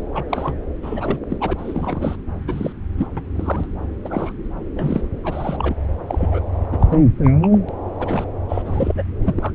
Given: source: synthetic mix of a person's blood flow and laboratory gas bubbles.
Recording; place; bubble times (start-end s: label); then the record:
Doppler ultrasound of blood flow; subclavian vein
0.14-0.23 s: bubbles
0.29-0.54 s: bubbles
0.82-1.19 s: bubbles
1.29-1.38 s: bubbles
1.40-1.53 s: bubbles
1.58-2.16 s: bubbles
2.48-2.73 s: bubbles
2.98-3.08 s: bubbles
3.17-3.22 s: bubbles
3.35-3.68 s: bubbles
4.04-4.33 s: bubbles
4.75-5.08 s: bubbles
5.24-5.76 s: bubbles
6.07-6.41 s: bubbles
6.72-6.78 s: bubbles
6.80-7.10 s: bubbles
7.23-7.31 s: bubbles
7.42-7.58 s: bubbles
7.69-7.74 s: bubbles
7.98-8.25 s: bubbles
8.48-8.62 s: bubbles
8.65-9.03 s: bubbles
9.22-9.52 s: bubbles
From the record:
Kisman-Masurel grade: 242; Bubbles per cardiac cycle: several, 3 to 8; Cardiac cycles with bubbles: 100%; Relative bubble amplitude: moderate (0.250 to 0.450); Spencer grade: 3 (all of the cardiac periods contain showers or single bubble signals, but not dominating or overriding the cardiac motion signals); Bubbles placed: anywhere in the cardiac cycle